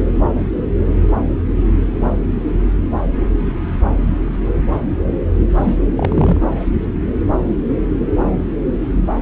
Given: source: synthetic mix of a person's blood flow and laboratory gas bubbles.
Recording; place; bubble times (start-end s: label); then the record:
Doppler ultrasound of blood flow; subclavian vein
5.49-5.77 s: bubbles
5.96-6.37 s: bubbles
From the record:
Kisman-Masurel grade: 113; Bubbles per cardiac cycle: 1 to 2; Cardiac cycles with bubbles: 1 to 10%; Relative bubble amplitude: loud (0.450 to 0.775); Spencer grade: 1 (occasional bubble signal discernible with the cardiac motion signal, with majority of cardiac periods free of bubbles); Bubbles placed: anywhere in the cardiac cycle